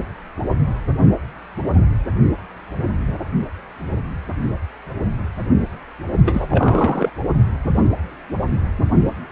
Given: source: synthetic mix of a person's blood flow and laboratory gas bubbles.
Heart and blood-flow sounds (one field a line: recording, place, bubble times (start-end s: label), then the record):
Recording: Doppler ultrasound of blood flow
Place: precordium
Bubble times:
6.25-7.10 s: bubbles
From the record:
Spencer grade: 1 (occasional bubble signal discernible with the cardiac motion signal, with majority of cardiac periods free of bubbles)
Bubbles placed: only in the low amplitude regions of the cardiac cycle